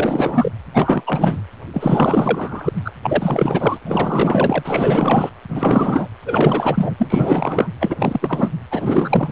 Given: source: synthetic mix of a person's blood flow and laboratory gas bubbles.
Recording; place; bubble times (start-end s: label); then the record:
Doppler ultrasound of blood flow; precordium
0.00-0.52 s: bubbles
0.74-1.03 s: bubbles
1.07-1.43 s: bubbles
1.74-2.72 s: bubbles
2.84-2.92 s: bubbles
3.02-3.79 s: bubbles
3.85-5.30 s: bubbles
5.49-6.08 s: bubbles
6.25-6.95 s: bubbles
6.98-7.68 s: bubbles
7.80-7.96 s: bubbles
7.99-8.52 s: bubbles
8.70-9.29 s: bubbles
From the record:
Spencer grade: 4 (maximum detectable bubble signal sounding continuously throughout systole and diastole of every cardiac period, and overriding the amplitude of the normal cardiac signals); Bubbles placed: anywhere in the cardiac cycle